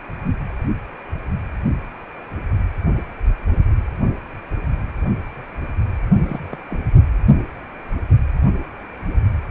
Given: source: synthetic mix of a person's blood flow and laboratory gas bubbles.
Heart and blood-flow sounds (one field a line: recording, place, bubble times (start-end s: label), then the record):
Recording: Doppler ultrasound of blood flow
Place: precordium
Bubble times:
6.12-6.44 s: bubbles
6.50-6.58 s: bubbles
6.70-6.83 s: bubbles
From the record:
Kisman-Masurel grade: 211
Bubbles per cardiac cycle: several, 3 to 8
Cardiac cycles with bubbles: 1 to 10%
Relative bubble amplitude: barely perceptible (0.100 to 0.250)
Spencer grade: 1 (occasional bubble signal discernible with the cardiac motion signal, with majority of cardiac periods free of bubbles)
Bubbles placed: anywhere in the cardiac cycle